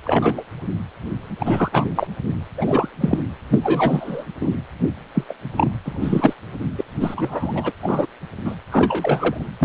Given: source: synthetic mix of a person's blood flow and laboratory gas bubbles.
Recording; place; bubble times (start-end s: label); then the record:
Doppler ultrasound of blood flow; precordium
0.04-0.43 s: bubbles
1.39-1.69 s: bubbles
1.72-1.88 s: bubbles
1.96-2.07 s: bubbles
2.57-2.88 s: bubbles
3.00-3.19 s: bubbles
3.50-3.59 s: bubbles
3.63-4.25 s: bubbles
4.41-4.50 s: bubbles
5.14-5.24 s: bubbles
5.29-5.34 s: bubbles
5.57-5.72 s: bubbles
5.85-6.33 s: bubbles
6.79-6.85 s: bubbles
7.00-7.72 s: bubbles
7.82-8.06 s: bubbles
8.45-8.55 s: bubbles
8.71-9.46 s: bubbles
9.59-9.65 s: bubbles
From the record:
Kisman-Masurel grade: 243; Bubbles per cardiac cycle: several, 3 to 8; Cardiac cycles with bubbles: 100%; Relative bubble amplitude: loud (0.450 to 0.775); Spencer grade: 3 (all of the cardiac periods contain showers or single bubble signals, but not dominating or overriding the cardiac motion signals); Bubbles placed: anywhere in the cardiac cycle